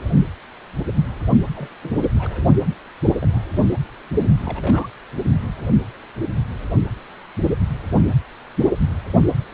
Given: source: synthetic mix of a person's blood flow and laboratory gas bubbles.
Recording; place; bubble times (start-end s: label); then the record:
Doppler ultrasound of blood flow; precordium
1.56-1.69 s: bubbles
1.82-2.09 s: bubbles
2.14-2.46 s: bubbles
2.49-2.56 s: bubbles
3.20-3.43 s: bubbles
3.53-3.67 s: bubbles
4.45-4.90 s: bubbles
From the record:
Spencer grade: 2 (many but less than half of the cardiac periods contain bubble signals, singularly or in groups); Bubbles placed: only in the low amplitude regions of the cardiac cycle